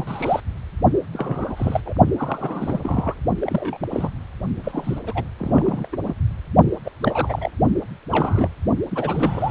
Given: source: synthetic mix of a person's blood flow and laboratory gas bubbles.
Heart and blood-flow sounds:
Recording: Doppler ultrasound of blood flow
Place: precordium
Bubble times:
0.00-0.40 s: bubbles
1.13-1.80 s: bubbles
1.85-1.94 s: bubbles
2.17-2.80 s: bubbles
2.83-3.15 s: bubbles
3.42-3.77 s: bubbles
3.80-3.88 s: bubbles
3.90-4.09 s: bubbles
4.63-4.99 s: bubbles
5.05-5.24 s: bubbles
5.39-5.88 s: bubbles
5.92-5.97 s: bubbles
6.04-6.14 s: bubbles
6.85-6.90 s: bubbles
7.01-7.51 s: bubbles
8.10-8.48 s: bubbles
8.90-9.51 s: bubbles
From the record:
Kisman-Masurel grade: 242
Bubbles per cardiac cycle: several, 3 to 8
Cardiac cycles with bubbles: 100%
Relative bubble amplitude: moderate (0.250 to 0.450)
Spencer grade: 3 (all of the cardiac periods contain showers or single bubble signals, but not dominating or overriding the cardiac motion signals)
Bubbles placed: only in the low amplitude regions of the cardiac cycle

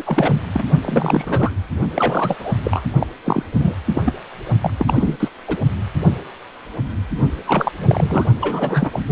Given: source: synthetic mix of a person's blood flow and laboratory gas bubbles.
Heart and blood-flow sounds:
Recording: Doppler ultrasound of blood flow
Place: precordium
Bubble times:
0.00-0.03 s: bubbles
0.06-0.41 s: bubbles
0.53-0.65 s: bubbles
0.82-1.52 s: bubbles
1.95-2.56 s: bubbles
2.64-2.83 s: bubbles
3.00-3.06 s: bubbles
3.25-3.43 s: bubbles
3.59-3.75 s: bubbles
3.95-4.02 s: bubbles
4.05-4.12 s: bubbles
4.62-4.71 s: bubbles
4.79-5.29 s: bubbles
5.47-5.57 s: bubbles
7.46-7.72 s: bubbles
7.79-8.25 s: bubbles
8.39-9.00 s: bubbles
9.07-9.12 s: bubbles
From the record:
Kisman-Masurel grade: 332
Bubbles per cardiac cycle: rolling drumbeat, 9 or more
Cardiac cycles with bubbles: 50 to 99%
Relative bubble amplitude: moderate (0.250 to 0.450)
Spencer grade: 3 (all of the cardiac periods contain showers or single bubble signals, but not dominating or overriding the cardiac motion signals)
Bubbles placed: only in the low amplitude regions of the cardiac cycle

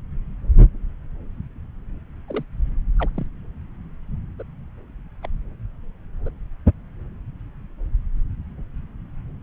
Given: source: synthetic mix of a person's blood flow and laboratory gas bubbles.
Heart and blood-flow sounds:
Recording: Doppler ultrasound of blood flow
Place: subclavian vein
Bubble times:
2.28-2.44 s: bubbles
2.99-3.09 s: bubbles
3.16-3.25 s: bubbles
4.38-4.43 s: bubbles
5.22-5.27 s: bubbles
6.25-6.29 s: bubbles
From the record:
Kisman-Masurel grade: 121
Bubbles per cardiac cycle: 1 to 2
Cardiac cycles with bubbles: 10 to 50%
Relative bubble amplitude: barely perceptible (0.100 to 0.250)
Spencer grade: 2 (many but less than half of the cardiac periods contain bubble signals, singularly or in groups)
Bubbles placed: anywhere in the cardiac cycle

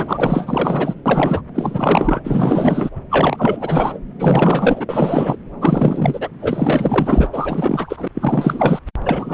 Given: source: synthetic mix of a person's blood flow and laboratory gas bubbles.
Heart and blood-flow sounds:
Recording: Doppler ultrasound of blood flow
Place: subclavian vein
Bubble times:
0.00-0.95 s: bubbles
1.05-1.42 s: bubbles
1.54-2.89 s: bubbles
3.10-4.00 s: bubbles
4.18-4.85 s: bubbles
4.88-5.36 s: bubbles
5.60-6.29 s: bubbles
6.40-7.27 s: bubbles
7.33-8.08 s: bubbles
8.14-8.79 s: bubbles
9.05-9.33 s: bubbles
From the record:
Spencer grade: 4 (maximum detectable bubble signal sounding continuously throughout systole and diastole of every cardiac period, and overriding the amplitude of the normal cardiac signals)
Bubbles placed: anywhere in the cardiac cycle

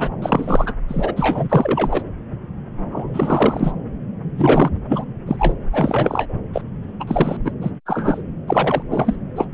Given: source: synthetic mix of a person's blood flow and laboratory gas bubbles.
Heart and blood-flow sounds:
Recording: Doppler ultrasound of blood flow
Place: subclavian vein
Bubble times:
0.00-0.09 s: bubbles
0.22-0.74 s: bubbles
0.88-2.03 s: bubbles
2.92-3.72 s: bubbles
4.38-4.70 s: bubbles
4.88-5.04 s: bubbles
5.26-5.56 s: bubbles
5.72-6.27 s: bubbles
6.53-6.62 s: bubbles
7.00-7.04 s: bubbles
7.07-7.37 s: bubbles
7.45-7.51 s: bubbles
7.61-7.71 s: bubbles
7.86-8.22 s: bubbles
8.47-8.82 s: bubbles
8.90-9.15 s: bubbles
9.36-9.48 s: bubbles
From the record:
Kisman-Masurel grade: 232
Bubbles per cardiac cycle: several, 3 to 8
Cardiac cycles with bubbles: 50 to 99%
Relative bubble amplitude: moderate (0.250 to 0.450)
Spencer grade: 3 (all of the cardiac periods contain showers or single bubble signals, but not dominating or overriding the cardiac motion signals)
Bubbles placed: anywhere in the cardiac cycle

